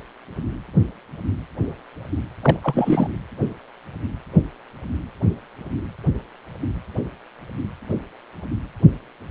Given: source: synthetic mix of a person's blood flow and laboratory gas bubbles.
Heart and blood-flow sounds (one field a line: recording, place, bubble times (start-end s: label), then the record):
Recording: Doppler ultrasound of blood flow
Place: precordium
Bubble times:
2.42-2.56 s: bubbles
2.62-3.08 s: bubbles
From the record:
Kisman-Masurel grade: 213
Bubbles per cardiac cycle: several, 3 to 8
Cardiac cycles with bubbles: 1 to 10%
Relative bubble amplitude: loud (0.450 to 0.775)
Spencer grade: 1 (occasional bubble signal discernible with the cardiac motion signal, with majority of cardiac periods free of bubbles)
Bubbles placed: anywhere in the cardiac cycle